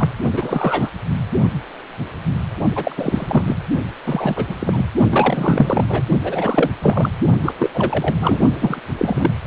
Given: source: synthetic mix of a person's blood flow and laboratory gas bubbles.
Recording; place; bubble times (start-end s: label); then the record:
Doppler ultrasound of blood flow; precordium
0.00-0.10 s: bubbles
0.32-0.90 s: bubbles
2.75-3.56 s: bubbles
4.06-4.55 s: bubbles
4.59-4.86 s: bubbles
5.09-5.86 s: bubbles
5.88-6.02 s: bubbles
6.24-6.70 s: bubbles
6.82-7.11 s: bubbles
7.42-7.53 s: bubbles
7.58-7.70 s: bubbles
7.74-8.15 s: bubbles
8.19-8.39 s: bubbles
8.58-8.80 s: bubbles
8.98-9.30 s: bubbles
From the record:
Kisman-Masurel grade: 333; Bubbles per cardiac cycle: rolling drumbeat, 9 or more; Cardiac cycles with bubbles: 50 to 99%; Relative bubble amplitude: loud (0.450 to 0.775); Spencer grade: 3 (all of the cardiac periods contain showers or single bubble signals, but not dominating or overriding the cardiac motion signals); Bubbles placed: only in the low amplitude regions of the cardiac cycle